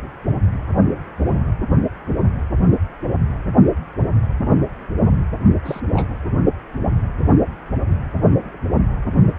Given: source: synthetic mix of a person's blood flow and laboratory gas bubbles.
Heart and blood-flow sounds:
Doppler ultrasound of blood flow; precordium
5.65-5.80 s: bubbles
5.93-6.09 s: bubbles
From the record:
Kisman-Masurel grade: 112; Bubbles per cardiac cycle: 1 to 2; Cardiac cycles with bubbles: 1 to 10%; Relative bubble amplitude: moderate (0.250 to 0.450); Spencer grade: 1 (occasional bubble signal discernible with the cardiac motion signal, with majority of cardiac periods free of bubbles); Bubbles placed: anywhere in the cardiac cycle

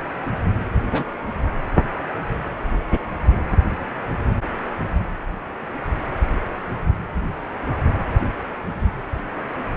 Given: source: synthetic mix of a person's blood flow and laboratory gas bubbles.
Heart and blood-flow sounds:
Doppler ultrasound of blood flow; precordium
0.92-1.04 s: bubbles
From the record:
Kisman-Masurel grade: 122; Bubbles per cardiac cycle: 1 to 2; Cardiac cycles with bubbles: 10 to 50%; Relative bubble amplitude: moderate (0.250 to 0.450); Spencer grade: 2 (many but less than half of the cardiac periods contain bubble signals, singularly or in groups); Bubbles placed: anywhere in the cardiac cycle

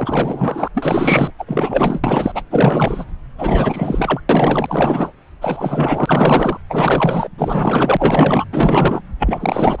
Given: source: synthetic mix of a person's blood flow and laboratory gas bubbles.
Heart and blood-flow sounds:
Doppler ultrasound of blood flow; subclavian vein
0.00-0.68 s: bubbles
0.74-1.31 s: bubbles
1.39-1.45 s: bubbles
1.47-2.43 s: bubbles
2.50-3.05 s: bubbles
3.38-4.21 s: bubbles
4.29-5.12 s: bubbles
5.41-6.57 s: bubbles
6.69-7.29 s: bubbles
7.38-8.45 s: bubbles
8.52-9.02 s: bubbles
9.19-9.80 s: bubbles
From the record:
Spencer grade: 4 (maximum detectable bubble signal sounding continuously throughout systole and diastole of every cardiac period, and overriding the amplitude of the normal cardiac signals); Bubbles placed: anywhere in the cardiac cycle

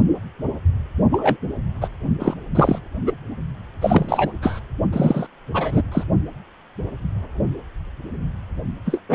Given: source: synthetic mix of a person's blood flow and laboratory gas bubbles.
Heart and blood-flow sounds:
Doppler ultrasound of blood flow; precordium
1.11-1.37 s: bubbles
1.81-1.88 s: bubbles
2.19-2.34 s: bubbles
2.55-2.79 s: bubbles
3.06-3.12 s: bubbles
3.81-4.32 s: bubbles
4.42-4.59 s: bubbles
4.92-5.26 s: bubbles
5.54-5.82 s: bubbles
5.92-6.04 s: bubbles
8.85-9.00 s: bubbles
9.09-9.15 s: bubbles
From the record:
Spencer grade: 3 (all of the cardiac periods contain showers or single bubble signals, but not dominating or overriding the cardiac motion signals); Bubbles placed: only in the low amplitude regions of the cardiac cycle

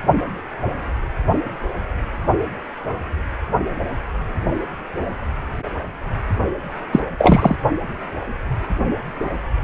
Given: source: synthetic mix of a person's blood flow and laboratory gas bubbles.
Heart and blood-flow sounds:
Doppler ultrasound of blood flow; precordium
6.92-7.00 s: bubbles
7.19-7.56 s: bubbles
From the record:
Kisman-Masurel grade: 213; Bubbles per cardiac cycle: several, 3 to 8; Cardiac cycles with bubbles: 1 to 10%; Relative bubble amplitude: loud (0.450 to 0.775); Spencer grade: 1 (occasional bubble signal discernible with the cardiac motion signal, with majority of cardiac periods free of bubbles); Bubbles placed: anywhere in the cardiac cycle

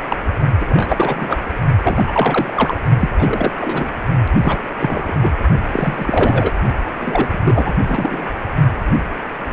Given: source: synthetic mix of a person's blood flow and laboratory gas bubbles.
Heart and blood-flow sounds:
Doppler ultrasound of blood flow; precordium
0.08-0.17 s: bubbles
0.60-1.37 s: bubbles
1.83-2.04 s: bubbles
2.06-2.78 s: bubbles
3.00-3.10 s: bubbles
3.18-3.52 s: bubbles
3.58-3.95 s: bubbles
4.41-4.58 s: bubbles
4.79-5.14 s: bubbles
5.21-5.33 s: bubbles
5.72-6.51 s: bubbles
7.00-7.29 s: bubbles
7.33-7.39 s: bubbles
7.45-7.75 s: bubbles
7.86-8.28 s: bubbles
From the record:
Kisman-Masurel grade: 333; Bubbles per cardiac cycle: rolling drumbeat, 9 or more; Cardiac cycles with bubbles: 50 to 99%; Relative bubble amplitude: loud (0.450 to 0.775); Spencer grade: 3 (all of the cardiac periods contain showers or single bubble signals, but not dominating or overriding the cardiac motion signals); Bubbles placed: only in the low amplitude regions of the cardiac cycle

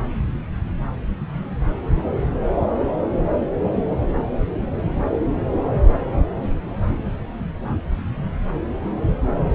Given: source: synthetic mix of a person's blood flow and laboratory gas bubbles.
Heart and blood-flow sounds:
Doppler ultrasound of blood flow; subclavian vein
no bubbles
From the record:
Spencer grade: 0 (complete lack of bubble signals)

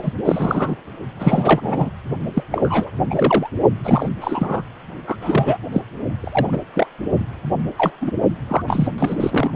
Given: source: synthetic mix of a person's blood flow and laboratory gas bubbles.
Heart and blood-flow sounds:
Doppler ultrasound of blood flow; precordium
0.02-0.13 s: bubbles
0.25-0.76 s: bubbles
1.19-1.90 s: bubbles
2.34-2.43 s: bubbles
2.52-2.90 s: bubbles
3.09-3.49 s: bubbles
3.85-4.09 s: bubbles
4.21-4.62 s: bubbles
5.07-5.17 s: bubbles
5.21-5.58 s: bubbles
5.73-5.82 s: bubbles
6.20-6.59 s: bubbles
6.74-6.87 s: bubbles
7.78-7.93 s: bubbles
8.01-8.11 s: bubbles
8.48-8.62 s: bubbles
8.67-8.88 s: bubbles
8.98-9.17 s: bubbles
9.20-9.51 s: bubbles
From the record:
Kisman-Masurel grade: 243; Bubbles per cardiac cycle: several, 3 to 8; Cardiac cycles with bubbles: 100%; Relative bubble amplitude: loud (0.450 to 0.775); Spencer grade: 3 (all of the cardiac periods contain showers or single bubble signals, but not dominating or overriding the cardiac motion signals); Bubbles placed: only in the low amplitude regions of the cardiac cycle

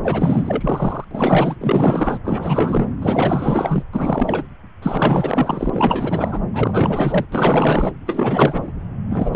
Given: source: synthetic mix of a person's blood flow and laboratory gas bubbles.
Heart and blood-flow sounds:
Doppler ultrasound of blood flow; subclavian vein
0.02-1.04 s: bubbles
1.11-1.55 s: bubbles
1.60-2.18 s: bubbles
2.24-2.88 s: bubbles
3.01-3.83 s: bubbles
3.93-4.44 s: bubbles
4.82-6.40 s: bubbles
6.53-7.25 s: bubbles
7.32-7.93 s: bubbles
8.05-8.72 s: bubbles
9.10-9.36 s: bubbles
From the record:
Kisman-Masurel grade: 444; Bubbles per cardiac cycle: continuous sound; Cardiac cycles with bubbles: 100%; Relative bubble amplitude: maximal (0.775 to 0.999); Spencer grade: 4 (maximum detectable bubble signal sounding continuously throughout systole and diastole of every cardiac period, and overriding the amplitude of the normal cardiac signals); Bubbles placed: anywhere in the cardiac cycle

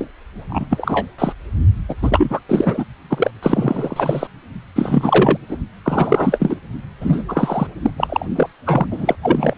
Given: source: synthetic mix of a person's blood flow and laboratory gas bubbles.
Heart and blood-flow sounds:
Doppler ultrasound of blood flow; precordium
0.00-0.07 s: bubbles
0.48-0.66 s: bubbles
0.70-1.07 s: bubbles
1.18-1.32 s: bubbles
1.89-1.95 s: bubbles
2.02-2.40 s: bubbles
2.49-2.85 s: bubbles
3.10-3.31 s: bubbles
3.42-4.27 s: bubbles
4.75-5.38 s: bubbles
5.49-5.58 s: bubbles
5.84-6.55 s: bubbles
7.00-7.23 s: bubbles
7.29-7.67 s: bubbles
7.82-7.90 s: bubbles
7.97-8.26 s: bubbles
8.35-8.48 s: bubbles
8.65-8.87 s: bubbles
8.90-9.15 s: bubbles
9.22-9.54 s: bubbles
From the record:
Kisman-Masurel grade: 343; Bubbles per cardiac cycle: rolling drumbeat, 9 or more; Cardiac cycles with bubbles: 100%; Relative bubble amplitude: loud (0.450 to 0.775); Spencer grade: 3 (all of the cardiac periods contain showers or single bubble signals, but not dominating or overriding the cardiac motion signals); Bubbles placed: only in the low amplitude regions of the cardiac cycle

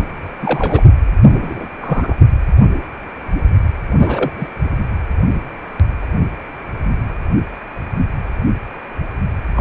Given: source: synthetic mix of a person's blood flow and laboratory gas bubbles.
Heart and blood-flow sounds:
Doppler ultrasound of blood flow; precordium
0.00-0.03 s: bubbles
0.39-0.95 s: bubbles
1.29-1.68 s: bubbles
1.81-2.17 s: bubbles
3.96-4.32 s: bubbles
4.37-4.50 s: bubbles
9.55-9.61 s: bubbles
From the record:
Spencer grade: 2 (many but less than half of the cardiac periods contain bubble signals, singularly or in groups); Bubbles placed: anywhere in the cardiac cycle

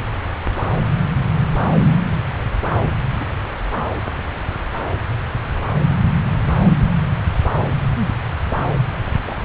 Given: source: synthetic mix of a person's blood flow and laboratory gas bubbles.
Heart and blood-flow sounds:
Doppler ultrasound of blood flow; subclavian vein
3.20-3.25 s: bubbles
9.26-9.34 s: bubbles
From the record:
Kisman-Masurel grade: 121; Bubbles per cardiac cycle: 1 to 2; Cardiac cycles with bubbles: 10 to 50%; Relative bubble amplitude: barely perceptible (0.100 to 0.250); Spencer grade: 2 (many but less than half of the cardiac periods contain bubble signals, singularly or in groups); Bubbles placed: anywhere in the cardiac cycle

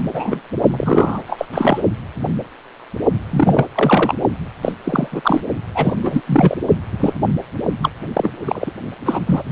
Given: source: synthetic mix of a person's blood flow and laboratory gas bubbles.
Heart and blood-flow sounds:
Doppler ultrasound of blood flow; precordium
0.13-0.42 s: bubbles
0.70-1.23 s: bubbles
1.27-1.47 s: bubbles
1.52-1.82 s: bubbles
3.31-3.66 s: bubbles
3.75-4.14 s: bubbles
4.62-4.72 s: bubbles
4.84-5.08 s: bubbles
5.11-5.41 s: bubbles
5.75-5.94 s: bubbles
6.03-6.22 s: bubbles
6.26-6.55 s: bubbles
7.00-7.13 s: bubbles
7.82-7.89 s: bubbles
8.13-8.29 s: bubbles
8.45-8.71 s: bubbles
9.05-9.20 s: bubbles
9.25-9.43 s: bubbles
From the record:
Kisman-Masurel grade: 233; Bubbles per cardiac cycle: several, 3 to 8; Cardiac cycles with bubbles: 50 to 99%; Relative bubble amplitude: loud (0.450 to 0.775); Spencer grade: 3 (all of the cardiac periods contain showers or single bubble signals, but not dominating or overriding the cardiac motion signals); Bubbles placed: only in the low amplitude regions of the cardiac cycle

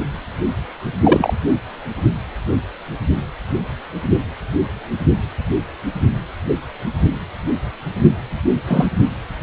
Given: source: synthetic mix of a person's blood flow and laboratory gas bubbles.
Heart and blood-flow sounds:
Doppler ultrasound of blood flow; precordium
1.03-1.33 s: bubbles
8.67-8.88 s: bubbles
From the record:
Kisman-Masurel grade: 123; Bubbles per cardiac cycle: 1 to 2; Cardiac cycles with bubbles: 10 to 50%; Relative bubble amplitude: loud (0.450 to 0.775); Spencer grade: 2 (many but less than half of the cardiac periods contain bubble signals, singularly or in groups); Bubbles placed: anywhere in the cardiac cycle

